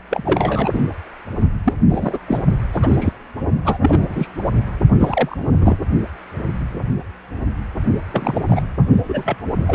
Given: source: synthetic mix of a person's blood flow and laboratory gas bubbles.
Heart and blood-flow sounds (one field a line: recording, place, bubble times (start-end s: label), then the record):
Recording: Doppler ultrasound of blood flow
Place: precordium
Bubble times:
0.10-0.80 s: bubbles
1.64-1.74 s: bubbles
1.90-2.18 s: bubbles
2.27-2.43 s: bubbles
2.73-2.79 s: bubbles
2.82-3.12 s: bubbles
3.65-3.77 s: bubbles
3.81-4.28 s: bubbles
5.00-5.38 s: bubbles
5.58-5.76 s: bubbles
8.12-8.43 s: bubbles
8.50-8.62 s: bubbles
9.08-9.37 s: bubbles
9.67-9.75 s: bubbles
From the record:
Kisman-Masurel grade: 232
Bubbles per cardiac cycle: several, 3 to 8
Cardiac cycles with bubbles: 50 to 99%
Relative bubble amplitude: moderate (0.250 to 0.450)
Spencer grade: 3 (all of the cardiac periods contain showers or single bubble signals, but not dominating or overriding the cardiac motion signals)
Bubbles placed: only in the low amplitude regions of the cardiac cycle